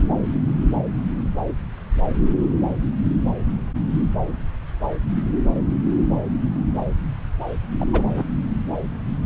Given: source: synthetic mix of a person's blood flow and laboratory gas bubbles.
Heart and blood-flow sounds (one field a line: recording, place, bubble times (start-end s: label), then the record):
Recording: Doppler ultrasound of blood flow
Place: subclavian vein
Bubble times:
7.80-7.85 s: bubbles
7.93-8.02 s: bubbles
8.15-8.24 s: bubbles
From the record:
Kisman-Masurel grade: 212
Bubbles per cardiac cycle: several, 3 to 8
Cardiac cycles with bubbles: 1 to 10%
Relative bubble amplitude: moderate (0.250 to 0.450)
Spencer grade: 1 (occasional bubble signal discernible with the cardiac motion signal, with majority of cardiac periods free of bubbles)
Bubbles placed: anywhere in the cardiac cycle